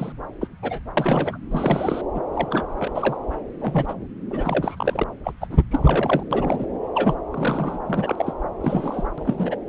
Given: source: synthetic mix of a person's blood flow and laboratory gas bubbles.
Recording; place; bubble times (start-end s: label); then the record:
Doppler ultrasound of blood flow; subclavian vein
0.00-0.12 s: bubbles
0.41-0.47 s: bubbles
0.62-0.79 s: bubbles
0.97-1.38 s: bubbles
1.51-2.02 s: bubbles
2.15-2.23 s: bubbles
2.33-2.65 s: bubbles
2.79-2.90 s: bubbles
2.94-3.17 s: bubbles
3.60-3.94 s: bubbles
4.30-5.04 s: bubbles
5.24-5.33 s: bubbles
5.41-5.58 s: bubbles
5.71-6.23 s: bubbles
6.31-6.66 s: bubbles
6.95-7.15 s: bubbles
7.31-7.79 s: bubbles
7.88-8.33 s: bubbles
8.61-9.09 s: bubbles
9.18-9.56 s: bubbles
From the record:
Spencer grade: 3 (all of the cardiac periods contain showers or single bubble signals, but not dominating or overriding the cardiac motion signals); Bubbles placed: anywhere in the cardiac cycle